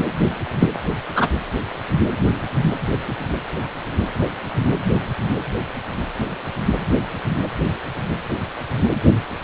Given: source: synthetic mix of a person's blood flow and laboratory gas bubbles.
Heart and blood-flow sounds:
Doppler ultrasound of blood flow; precordium
0.59-0.68 s: bubbles
1.15-1.27 s: bubbles
From the record:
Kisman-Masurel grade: 113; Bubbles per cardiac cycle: 1 to 2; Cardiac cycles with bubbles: 1 to 10%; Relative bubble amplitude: loud (0.450 to 0.775); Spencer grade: 1 (occasional bubble signal discernible with the cardiac motion signal, with majority of cardiac periods free of bubbles); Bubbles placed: anywhere in the cardiac cycle

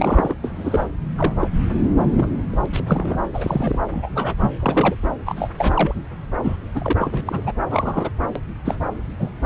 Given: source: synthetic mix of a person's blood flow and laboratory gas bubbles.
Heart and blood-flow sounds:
Doppler ultrasound of blood flow; subclavian vein
0.00-0.34 s: bubbles
0.44-0.88 s: bubbles
1.17-1.35 s: bubbles
1.40-1.48 s: bubbles
2.00-2.28 s: bubbles
2.52-2.66 s: bubbles
2.73-3.19 s: bubbles
3.33-3.79 s: bubbles
3.92-4.34 s: bubbles
4.38-4.51 s: bubbles
4.59-4.96 s: bubbles
5.25-5.50 s: bubbles
5.56-5.95 s: bubbles
6.43-6.56 s: bubbles
6.75-6.93 s: bubbles
6.98-7.52 s: bubbles
7.70-8.09 s: bubbles
8.35-8.40 s: bubbles
8.65-8.78 s: bubbles
9.19-9.30 s: bubbles
From the record:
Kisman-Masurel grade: 242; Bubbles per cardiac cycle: several, 3 to 8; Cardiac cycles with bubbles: 100%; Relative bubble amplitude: moderate (0.250 to 0.450); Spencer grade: 3 (all of the cardiac periods contain showers or single bubble signals, but not dominating or overriding the cardiac motion signals); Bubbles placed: anywhere in the cardiac cycle

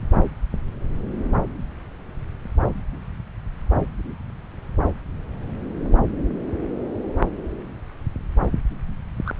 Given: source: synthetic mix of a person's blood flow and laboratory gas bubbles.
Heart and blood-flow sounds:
Doppler ultrasound of blood flow; subclavian vein
9.26-9.32 s: bubbles
From the record:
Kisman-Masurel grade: 112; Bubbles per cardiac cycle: 1 to 2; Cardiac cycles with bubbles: 1 to 10%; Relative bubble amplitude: moderate (0.250 to 0.450); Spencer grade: 1 (occasional bubble signal discernible with the cardiac motion signal, with majority of cardiac periods free of bubbles); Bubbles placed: anywhere in the cardiac cycle

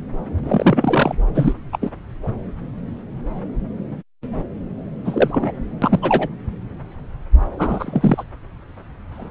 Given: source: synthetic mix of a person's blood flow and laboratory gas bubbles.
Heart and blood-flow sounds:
Doppler ultrasound of blood flow; subclavian vein
0.43-1.15 s: bubbles
1.35-1.53 s: bubbles
1.72-1.77 s: bubbles
1.81-1.90 s: bubbles
5.04-5.51 s: bubbles
5.82-6.28 s: bubbles
7.58-8.24 s: bubbles
9.11-9.31 s: bubbles
From the record:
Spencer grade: 3 (all of the cardiac periods contain showers or single bubble signals, but not dominating or overriding the cardiac motion signals); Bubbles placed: anywhere in the cardiac cycle

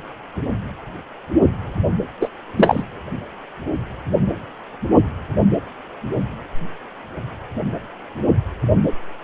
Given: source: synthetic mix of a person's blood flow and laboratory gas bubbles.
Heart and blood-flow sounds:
Doppler ultrasound of blood flow; precordium
2.21-2.28 s: bubbles
2.57-2.83 s: bubbles
From the record:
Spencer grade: 1 (occasional bubble signal discernible with the cardiac motion signal, with majority of cardiac periods free of bubbles); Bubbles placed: anywhere in the cardiac cycle

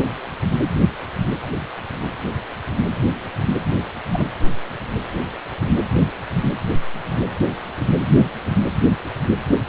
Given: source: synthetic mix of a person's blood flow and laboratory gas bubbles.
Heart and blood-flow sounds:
Doppler ultrasound of blood flow; precordium
4.12-4.27 s: bubbles
From the record:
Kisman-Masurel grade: 111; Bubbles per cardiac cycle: 1 to 2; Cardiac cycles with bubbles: 1 to 10%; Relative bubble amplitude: barely perceptible (0.100 to 0.250); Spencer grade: 1 (occasional bubble signal discernible with the cardiac motion signal, with majority of cardiac periods free of bubbles); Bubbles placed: anywhere in the cardiac cycle

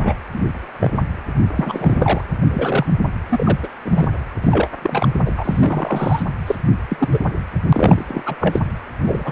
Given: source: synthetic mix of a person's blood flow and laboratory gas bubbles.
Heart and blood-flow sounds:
Doppler ultrasound of blood flow; precordium
0.04-0.14 s: bubbles
0.33-0.40 s: bubbles
0.79-0.97 s: bubbles
1.55-2.22 s: bubbles
2.50-2.86 s: bubbles
3.29-3.58 s: bubbles
3.63-3.67 s: bubbles
3.85-4.08 s: bubbles
4.41-4.68 s: bubbles
4.83-5.08 s: bubbles
5.26-5.31 s: bubbles
5.37-6.23 s: bubbles
6.47-6.55 s: bubbles
6.90-7.08 s: bubbles
7.12-7.19 s: bubbles
7.69-8.04 s: bubbles
8.07-8.23 s: bubbles
8.25-8.36 s: bubbles
8.40-8.59 s: bubbles
9.04-9.32 s: bubbles
From the record:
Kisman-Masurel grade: 243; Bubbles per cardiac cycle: several, 3 to 8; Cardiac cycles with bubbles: 100%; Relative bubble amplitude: loud (0.450 to 0.775); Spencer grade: 3 (all of the cardiac periods contain showers or single bubble signals, but not dominating or overriding the cardiac motion signals); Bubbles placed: anywhere in the cardiac cycle

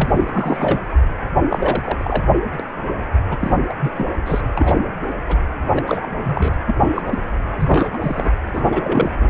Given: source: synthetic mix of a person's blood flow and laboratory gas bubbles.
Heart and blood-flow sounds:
Doppler ultrasound of blood flow; precordium
0.00-0.92 s: bubbles
1.51-1.97 s: bubbles
1.99-2.23 s: bubbles
2.60-2.63 s: bubbles
3.30-3.58 s: bubbles
3.69-3.74 s: bubbles
3.80-3.93 s: bubbles
3.98-4.17 s: bubbles
4.26-4.41 s: bubbles
4.55-4.80 s: bubbles
5.28-5.37 s: bubbles
5.75-5.83 s: bubbles
5.86-6.09 s: bubbles
6.23-6.54 s: bubbles
6.67-6.75 s: bubbles
6.80-6.90 s: bubbles
6.96-7.02 s: bubbles
7.07-7.19 s: bubbles
7.59-7.98 s: bubbles
8.01-8.30 s: bubbles
8.53-9.10 s: bubbles
9.21-9.28 s: bubbles
From the record:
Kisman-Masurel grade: 242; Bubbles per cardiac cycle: several, 3 to 8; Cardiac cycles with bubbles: 100%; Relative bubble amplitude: moderate (0.250 to 0.450); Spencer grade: 3 (all of the cardiac periods contain showers or single bubble signals, but not dominating or overriding the cardiac motion signals); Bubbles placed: anywhere in the cardiac cycle

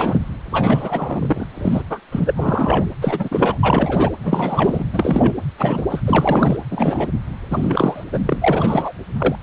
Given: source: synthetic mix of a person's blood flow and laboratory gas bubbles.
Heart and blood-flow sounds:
Doppler ultrasound of blood flow; precordium
0.00-0.19 s: bubbles
0.51-1.46 s: bubbles
1.54-1.82 s: bubbles
1.90-2.00 s: bubbles
2.11-2.32 s: bubbles
2.36-2.85 s: bubbles
3.01-3.59 s: bubbles
3.62-4.12 s: bubbles
4.23-4.84 s: bubbles
4.92-5.34 s: bubbles
5.58-5.86 s: bubbles
5.89-6.00 s: bubbles
6.07-6.56 s: bubbles
6.71-7.09 s: bubbles
7.50-8.04 s: bubbles
8.12-8.19 s: bubbles
8.26-8.94 s: bubbles
9.18-9.36 s: bubbles
From the record:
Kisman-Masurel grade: 343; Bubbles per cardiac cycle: rolling drumbeat, 9 or more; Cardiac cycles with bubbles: 100%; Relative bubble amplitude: loud (0.450 to 0.775); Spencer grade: 3 (all of the cardiac periods contain showers or single bubble signals, but not dominating or overriding the cardiac motion signals); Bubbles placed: anywhere in the cardiac cycle

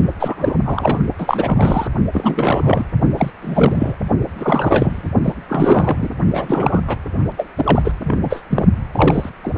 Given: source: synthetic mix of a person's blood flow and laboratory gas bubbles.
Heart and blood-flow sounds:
Doppler ultrasound of blood flow; precordium
0.20-0.54 s: bubbles
0.65-0.98 s: bubbles
1.19-1.87 s: bubbles
2.13-2.83 s: bubbles
3.17-3.30 s: bubbles
3.42-3.95 s: bubbles
4.37-5.10 s: bubbles
5.23-5.34 s: bubbles
5.49-6.09 s: bubbles
6.33-6.80 s: bubbles
6.87-6.97 s: bubbles
7.37-7.46 s: bubbles
7.56-7.92 s: bubbles
8.04-8.18 s: bubbles
8.23-8.43 s: bubbles
8.50-8.65 s: bubbles
8.92-9.29 s: bubbles
9.43-9.58 s: bubbles
From the record:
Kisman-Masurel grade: 333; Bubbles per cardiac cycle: rolling drumbeat, 9 or more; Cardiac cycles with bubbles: 50 to 99%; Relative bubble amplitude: loud (0.450 to 0.775); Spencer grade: 3 (all of the cardiac periods contain showers or single bubble signals, but not dominating or overriding the cardiac motion signals); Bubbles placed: only in the low amplitude regions of the cardiac cycle

